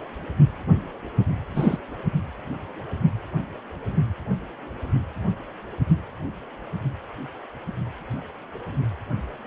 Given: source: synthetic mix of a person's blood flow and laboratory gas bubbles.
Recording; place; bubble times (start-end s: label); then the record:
Doppler ultrasound of blood flow; precordium
1.54-1.78 s: bubbles
From the record:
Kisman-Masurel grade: 112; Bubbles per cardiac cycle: 1 to 2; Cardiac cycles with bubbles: 1 to 10%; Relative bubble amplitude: moderate (0.250 to 0.450); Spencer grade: 1 (occasional bubble signal discernible with the cardiac motion signal, with majority of cardiac periods free of bubbles); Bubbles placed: only in the low amplitude regions of the cardiac cycle